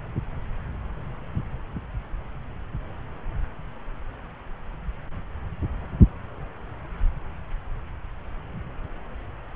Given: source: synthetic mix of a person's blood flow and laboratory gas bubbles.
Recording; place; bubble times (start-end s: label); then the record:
Doppler ultrasound of blood flow; subclavian vein
no bubbles
From the record:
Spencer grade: 0 (complete lack of bubble signals)